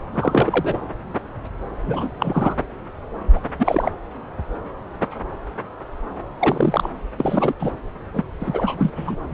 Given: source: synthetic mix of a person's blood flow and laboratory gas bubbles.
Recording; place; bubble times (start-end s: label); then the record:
Doppler ultrasound of blood flow; subclavian vein
0.14-0.78 s: bubbles
1.83-2.10 s: bubbles
2.19-2.56 s: bubbles
3.35-3.40 s: bubbles
3.58-3.92 s: bubbles
6.39-6.90 s: bubbles
7.18-7.54 s: bubbles
7.59-7.72 s: bubbles
8.13-8.25 s: bubbles
8.39-8.91 s: bubbles
8.95-9.15 s: bubbles
9.31-9.34 s: bubbles
From the record:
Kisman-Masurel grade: 233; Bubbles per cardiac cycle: several, 3 to 8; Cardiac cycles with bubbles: 50 to 99%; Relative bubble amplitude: loud (0.450 to 0.775); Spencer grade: 3 (all of the cardiac periods contain showers or single bubble signals, but not dominating or overriding the cardiac motion signals); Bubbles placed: anywhere in the cardiac cycle